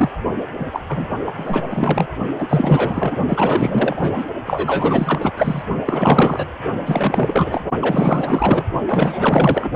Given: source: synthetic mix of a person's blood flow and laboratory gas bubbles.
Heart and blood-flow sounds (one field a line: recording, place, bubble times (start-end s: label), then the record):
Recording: Doppler ultrasound of blood flow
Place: precordium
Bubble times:
0.00-0.11 s: bubbles
0.59-0.66 s: bubbles
0.71-0.80 s: bubbles
0.88-1.05 s: bubbles
1.26-1.33 s: bubbles
1.38-1.63 s: bubbles
1.71-2.07 s: bubbles
2.38-3.15 s: bubbles
3.28-4.11 s: bubbles
4.14-4.25 s: bubbles
4.46-5.32 s: bubbles
5.37-5.62 s: bubbles
5.85-6.45 s: bubbles
6.85-7.63 s: bubbles
7.81-8.66 s: bubbles
8.87-9.69 s: bubbles
From the record:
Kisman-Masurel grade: 444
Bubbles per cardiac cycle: continuous sound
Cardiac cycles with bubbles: 100%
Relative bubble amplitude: maximal (0.775 to 0.999)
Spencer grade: 4 (maximum detectable bubble signal sounding continuously throughout systole and diastole of every cardiac period, and overriding the amplitude of the normal cardiac signals)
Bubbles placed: only in the low amplitude regions of the cardiac cycle